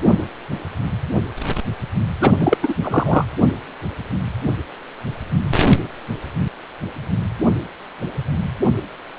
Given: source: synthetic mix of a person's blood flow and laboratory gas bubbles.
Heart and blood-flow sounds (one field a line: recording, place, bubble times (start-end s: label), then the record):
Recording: Doppler ultrasound of blood flow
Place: precordium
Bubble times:
2.20-2.33 s: bubbles
2.39-2.58 s: bubbles
2.62-2.75 s: bubbles
2.82-3.25 s: bubbles
From the record:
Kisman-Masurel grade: 213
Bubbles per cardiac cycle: several, 3 to 8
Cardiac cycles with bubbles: 1 to 10%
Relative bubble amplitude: loud (0.450 to 0.775)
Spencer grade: 1 (occasional bubble signal discernible with the cardiac motion signal, with majority of cardiac periods free of bubbles)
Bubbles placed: anywhere in the cardiac cycle